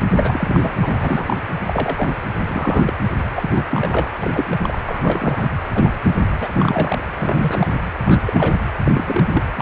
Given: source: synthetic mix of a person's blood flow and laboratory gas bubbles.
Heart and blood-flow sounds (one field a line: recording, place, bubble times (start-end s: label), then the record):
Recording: Doppler ultrasound of blood flow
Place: precordium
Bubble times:
0.08-0.79 s: bubbles
0.81-1.36 s: bubbles
1.67-2.08 s: bubbles
2.44-2.93 s: bubbles
3.33-3.66 s: bubbles
3.71-4.13 s: bubbles
4.22-4.46 s: bubbles
4.50-4.57 s: bubbles
4.61-4.78 s: bubbles
4.85-5.53 s: bubbles
5.74-5.91 s: bubbles
6.40-6.49 s: bubbles
6.53-6.98 s: bubbles
7.14-7.67 s: bubbles
8.04-8.22 s: bubbles
8.25-8.57 s: bubbles
8.84-9.44 s: bubbles
9.55-9.62 s: bubbles
From the record:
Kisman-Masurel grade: 242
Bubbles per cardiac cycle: several, 3 to 8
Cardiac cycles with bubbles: 100%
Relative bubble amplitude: moderate (0.250 to 0.450)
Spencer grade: 3 (all of the cardiac periods contain showers or single bubble signals, but not dominating or overriding the cardiac motion signals)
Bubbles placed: anywhere in the cardiac cycle